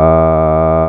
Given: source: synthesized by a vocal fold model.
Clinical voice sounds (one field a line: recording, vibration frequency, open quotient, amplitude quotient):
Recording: sustained vowel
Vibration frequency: 80 Hz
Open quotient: 0.4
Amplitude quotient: 1